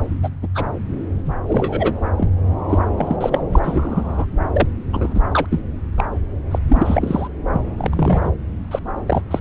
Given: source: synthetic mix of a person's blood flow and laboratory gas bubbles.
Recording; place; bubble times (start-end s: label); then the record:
Doppler ultrasound of blood flow; subclavian vein
0.22-0.29 s: bubbles
0.42-0.47 s: bubbles
0.54-0.65 s: bubbles
1.26-1.35 s: bubbles
1.47-1.94 s: bubbles
2.17-2.30 s: bubbles
2.69-2.79 s: bubbles
2.96-3.17 s: bubbles
3.21-3.42 s: bubbles
3.52-3.59 s: bubbles
3.63-4.26 s: bubbles
4.53-4.68 s: bubbles
4.93-5.21 s: bubbles
5.31-5.46 s: bubbles
5.50-5.60 s: bubbles
5.97-6.04 s: bubbles
6.51-6.59 s: bubbles
6.68-7.27 s: bubbles
7.51-7.62 s: bubbles
7.77-8.30 s: bubbles
8.71-8.79 s: bubbles
9.06-9.21 s: bubbles
9.30-9.39 s: bubbles
From the record:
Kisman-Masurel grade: 242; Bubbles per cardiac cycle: several, 3 to 8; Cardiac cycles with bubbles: 100%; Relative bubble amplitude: moderate (0.250 to 0.450); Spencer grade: 3 (all of the cardiac periods contain showers or single bubble signals, but not dominating or overriding the cardiac motion signals); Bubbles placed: anywhere in the cardiac cycle